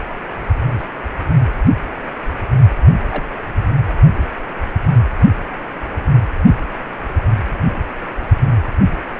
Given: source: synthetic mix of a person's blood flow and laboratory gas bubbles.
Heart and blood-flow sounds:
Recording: Doppler ultrasound of blood flow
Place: precordium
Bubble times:
3.09-3.23 s: bubbles
From the record:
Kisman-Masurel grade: 111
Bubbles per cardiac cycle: 1 to 2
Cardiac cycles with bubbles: 1 to 10%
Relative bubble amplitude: barely perceptible (0.100 to 0.250)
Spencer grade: 1 (occasional bubble signal discernible with the cardiac motion signal, with majority of cardiac periods free of bubbles)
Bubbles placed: only in the low amplitude regions of the cardiac cycle

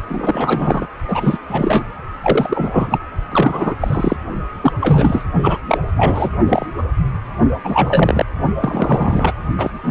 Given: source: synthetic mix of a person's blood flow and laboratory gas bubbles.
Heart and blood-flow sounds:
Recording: Doppler ultrasound of blood flow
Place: precordium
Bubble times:
0.07-0.86 s: bubbles
1.07-1.38 s: bubbles
1.48-1.84 s: bubbles
2.21-2.99 s: bubbles
3.32-3.75 s: bubbles
3.80-4.17 s: bubbles
4.61-4.73 s: bubbles
4.80-5.24 s: bubbles
5.42-5.58 s: bubbles
5.68-5.79 s: bubbles
5.96-6.30 s: bubbles
6.48-6.66 s: bubbles
6.77-6.82 s: bubbles
7.64-8.24 s: bubbles
8.60-9.33 s: bubbles
9.58-9.71 s: bubbles
9.84-9.91 s: bubbles
From the record:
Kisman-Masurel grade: 343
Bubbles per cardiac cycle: rolling drumbeat, 9 or more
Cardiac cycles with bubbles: 100%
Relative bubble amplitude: loud (0.450 to 0.775)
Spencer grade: 3 (all of the cardiac periods contain showers or single bubble signals, but not dominating or overriding the cardiac motion signals)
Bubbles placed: only in the low amplitude regions of the cardiac cycle

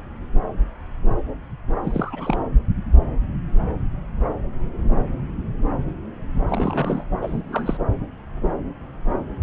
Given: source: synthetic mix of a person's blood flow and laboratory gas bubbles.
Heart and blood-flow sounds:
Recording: Doppler ultrasound of blood flow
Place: subclavian vein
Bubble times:
1.83-2.41 s: bubbles
6.49-7.04 s: bubbles
7.22-7.78 s: bubbles
From the record:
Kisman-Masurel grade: 222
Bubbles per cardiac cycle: several, 3 to 8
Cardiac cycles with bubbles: 10 to 50%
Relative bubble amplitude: moderate (0.250 to 0.450)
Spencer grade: 2 (many but less than half of the cardiac periods contain bubble signals, singularly or in groups)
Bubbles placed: anywhere in the cardiac cycle

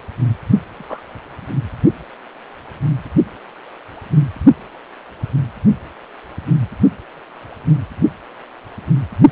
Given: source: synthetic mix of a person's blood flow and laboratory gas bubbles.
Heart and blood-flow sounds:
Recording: Doppler ultrasound of blood flow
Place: precordium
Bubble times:
0.75-1.02 s: bubbles
From the record:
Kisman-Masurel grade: 121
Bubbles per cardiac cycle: 1 to 2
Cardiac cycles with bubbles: 10 to 50%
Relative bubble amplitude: barely perceptible (0.100 to 0.250)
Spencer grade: 2 (many but less than half of the cardiac periods contain bubble signals, singularly or in groups)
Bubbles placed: anywhere in the cardiac cycle

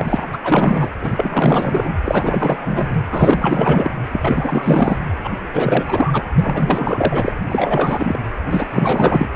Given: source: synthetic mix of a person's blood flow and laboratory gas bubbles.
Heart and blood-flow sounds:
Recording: Doppler ultrasound of blood flow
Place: precordium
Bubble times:
0.00-0.38 s: bubbles
0.43-0.90 s: bubbles
1.01-1.96 s: bubbles
2.05-2.58 s: bubbles
2.61-3.04 s: bubbles
3.09-3.91 s: bubbles
4.12-4.97 s: bubbles
5.24-5.29 s: bubbles
5.54-6.25 s: bubbles
6.35-7.31 s: bubbles
7.48-8.19 s: bubbles
8.49-8.67 s: bubbles
8.70-9.29 s: bubbles
From the record:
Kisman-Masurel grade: 444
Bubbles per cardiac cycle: continuous sound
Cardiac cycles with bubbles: 100%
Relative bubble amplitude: maximal (0.775 to 0.999)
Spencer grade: 4 (maximum detectable bubble signal sounding continuously throughout systole and diastole of every cardiac period, and overriding the amplitude of the normal cardiac signals)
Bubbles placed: anywhere in the cardiac cycle

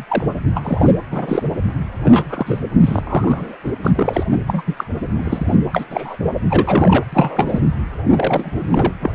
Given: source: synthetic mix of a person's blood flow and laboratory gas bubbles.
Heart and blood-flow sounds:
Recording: Doppler ultrasound of blood flow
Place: precordium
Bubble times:
0.00-0.04 s: bubbles
0.09-0.26 s: bubbles
0.55-0.95 s: bubbles
1.11-1.48 s: bubbles
2.03-2.60 s: bubbles
2.79-3.01 s: bubbles
3.07-3.57 s: bubbles
3.64-3.73 s: bubbles
3.83-3.91 s: bubbles
3.95-4.24 s: bubbles
4.47-4.62 s: bubbles
4.66-4.74 s: bubbles
4.77-4.85 s: bubbles
5.17-5.55 s: bubbles
5.73-5.85 s: bubbles
5.90-6.17 s: bubbles
6.47-7.04 s: bubbles
7.12-7.61 s: bubbles
8.15-8.93 s: bubbles
9.00-9.14 s: bubbles
From the record:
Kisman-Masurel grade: 242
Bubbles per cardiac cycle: several, 3 to 8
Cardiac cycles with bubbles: 100%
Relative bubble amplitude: moderate (0.250 to 0.450)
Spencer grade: 3 (all of the cardiac periods contain showers or single bubble signals, but not dominating or overriding the cardiac motion signals)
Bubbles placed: anywhere in the cardiac cycle

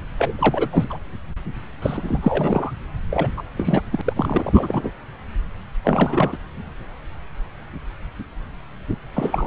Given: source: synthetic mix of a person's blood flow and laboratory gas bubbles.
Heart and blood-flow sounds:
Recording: Doppler ultrasound of blood flow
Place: subclavian vein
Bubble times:
0.18-0.69 s: bubbles
0.72-0.84 s: bubbles
0.90-0.98 s: bubbles
1.82-2.71 s: bubbles
3.10-3.28 s: bubbles
3.37-3.43 s: bubbles
3.56-3.83 s: bubbles
3.92-4.02 s: bubbles
4.05-4.13 s: bubbles
4.16-4.90 s: bubbles
5.84-6.38 s: bubbles
9.13-9.47 s: bubbles
From the record:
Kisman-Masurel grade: 332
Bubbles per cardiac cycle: rolling drumbeat, 9 or more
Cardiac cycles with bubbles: 50 to 99%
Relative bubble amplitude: moderate (0.250 to 0.450)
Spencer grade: 3 (all of the cardiac periods contain showers or single bubble signals, but not dominating or overriding the cardiac motion signals)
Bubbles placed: anywhere in the cardiac cycle

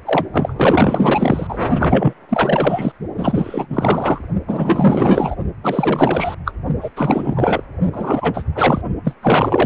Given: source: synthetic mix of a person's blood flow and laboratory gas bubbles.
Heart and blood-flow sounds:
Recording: Doppler ultrasound of blood flow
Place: precordium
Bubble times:
0.05-0.27 s: bubbles
0.33-1.59 s: bubbles
1.79-2.13 s: bubbles
2.29-2.92 s: bubbles
3.17-3.67 s: bubbles
3.69-4.18 s: bubbles
4.47-5.35 s: bubbles
5.63-6.35 s: bubbles
6.45-6.52 s: bubbles
6.81-6.89 s: bubbles
6.96-7.61 s: bubbles
7.92-8.45 s: bubbles
8.55-8.81 s: bubbles
9.04-9.14 s: bubbles
9.22-9.66 s: bubbles
From the record:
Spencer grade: 4 (maximum detectable bubble signal sounding continuously throughout systole and diastole of every cardiac period, and overriding the amplitude of the normal cardiac signals)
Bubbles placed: only in the low amplitude regions of the cardiac cycle

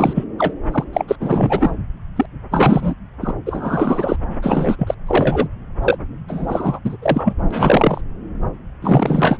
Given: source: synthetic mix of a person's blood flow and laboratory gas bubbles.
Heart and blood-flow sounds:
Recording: Doppler ultrasound of blood flow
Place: subclavian vein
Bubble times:
0.00-0.24 s: bubbles
0.38-0.55 s: bubbles
0.72-0.84 s: bubbles
0.93-1.05 s: bubbles
1.07-1.16 s: bubbles
1.20-1.71 s: bubbles
2.16-2.25 s: bubbles
2.51-2.94 s: bubbles
3.21-3.34 s: bubbles
3.45-4.16 s: bubbles
4.42-4.95 s: bubbles
5.07-5.48 s: bubbles
5.82-5.98 s: bubbles
6.28-6.79 s: bubbles
6.84-6.97 s: bubbles
7.02-7.34 s: bubbles
7.50-8.01 s: bubbles
8.82-9.38 s: bubbles
From the record:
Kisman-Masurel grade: 343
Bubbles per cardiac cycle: rolling drumbeat, 9 or more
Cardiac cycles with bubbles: 100%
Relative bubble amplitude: loud (0.450 to 0.775)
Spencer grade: 3 (all of the cardiac periods contain showers or single bubble signals, but not dominating or overriding the cardiac motion signals)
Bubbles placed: anywhere in the cardiac cycle

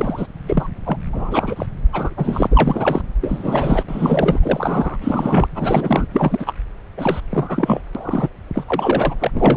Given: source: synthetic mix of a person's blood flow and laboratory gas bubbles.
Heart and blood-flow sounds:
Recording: Doppler ultrasound of blood flow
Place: subclavian vein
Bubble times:
0.00-0.28 s: bubbles
0.46-0.69 s: bubbles
0.85-0.97 s: bubbles
1.13-1.66 s: bubbles
1.93-2.14 s: bubbles
2.17-2.47 s: bubbles
2.50-3.02 s: bubbles
3.21-3.83 s: bubbles
3.88-4.40 s: bubbles
4.42-4.97 s: bubbles
5.01-5.48 s: bubbles
5.55-6.07 s: bubbles
6.13-6.54 s: bubbles
6.97-7.21 s: bubbles
7.29-7.81 s: bubbles
7.95-8.29 s: bubbles
8.54-8.64 s: bubbles
8.67-9.14 s: bubbles
9.20-9.31 s: bubbles
9.34-9.57 s: bubbles
From the record:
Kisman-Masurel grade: 333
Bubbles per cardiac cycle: rolling drumbeat, 9 or more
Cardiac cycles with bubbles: 50 to 99%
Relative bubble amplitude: loud (0.450 to 0.775)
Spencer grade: 3 (all of the cardiac periods contain showers or single bubble signals, but not dominating or overriding the cardiac motion signals)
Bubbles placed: anywhere in the cardiac cycle

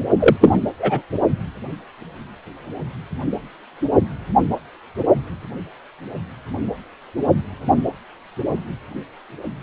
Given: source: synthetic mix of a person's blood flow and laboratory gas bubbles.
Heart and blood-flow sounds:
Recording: Doppler ultrasound of blood flow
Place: precordium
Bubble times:
0.19-0.36 s: bubbles
0.41-0.60 s: bubbles
0.79-1.02 s: bubbles
From the record:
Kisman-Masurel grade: 213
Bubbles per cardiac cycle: several, 3 to 8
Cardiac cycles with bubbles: 1 to 10%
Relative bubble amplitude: loud (0.450 to 0.775)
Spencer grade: 1 (occasional bubble signal discernible with the cardiac motion signal, with majority of cardiac periods free of bubbles)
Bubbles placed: only in the low amplitude regions of the cardiac cycle

